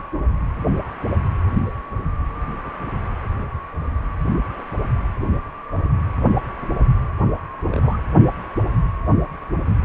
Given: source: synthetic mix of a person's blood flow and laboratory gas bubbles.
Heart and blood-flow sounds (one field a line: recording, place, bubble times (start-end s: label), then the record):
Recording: Doppler ultrasound of blood flow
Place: precordium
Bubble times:
7.71-7.98 s: bubbles
From the record:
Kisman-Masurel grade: 111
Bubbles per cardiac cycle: 1 to 2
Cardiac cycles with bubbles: 1 to 10%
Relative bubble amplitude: barely perceptible (0.100 to 0.250)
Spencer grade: 1 (occasional bubble signal discernible with the cardiac motion signal, with majority of cardiac periods free of bubbles)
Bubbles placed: anywhere in the cardiac cycle